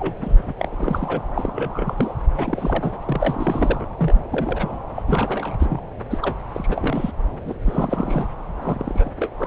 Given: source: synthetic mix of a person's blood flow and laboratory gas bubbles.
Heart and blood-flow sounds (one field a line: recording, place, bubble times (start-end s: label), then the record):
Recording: Doppler ultrasound of blood flow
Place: subclavian vein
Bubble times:
0.00-0.14 s: bubbles
0.18-0.54 s: bubbles
0.59-1.21 s: bubbles
1.35-1.95 s: bubbles
1.98-2.13 s: bubbles
2.34-2.97 s: bubbles
3.06-3.85 s: bubbles
3.99-4.21 s: bubbles
4.31-4.79 s: bubbles
4.95-5.03 s: bubbles
5.08-5.56 s: bubbles
5.59-5.81 s: bubbles
6.10-6.19 s: bubbles
6.22-6.36 s: bubbles
6.53-7.12 s: bubbles
7.45-7.54 s: bubbles
7.65-8.27 s: bubbles
8.61-9.11 s: bubbles
9.16-9.30 s: bubbles
9.38-9.47 s: bubbles
From the record:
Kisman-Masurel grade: 342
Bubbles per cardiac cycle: rolling drumbeat, 9 or more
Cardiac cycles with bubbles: 100%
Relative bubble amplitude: moderate (0.250 to 0.450)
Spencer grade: 3 (all of the cardiac periods contain showers or single bubble signals, but not dominating or overriding the cardiac motion signals)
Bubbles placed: anywhere in the cardiac cycle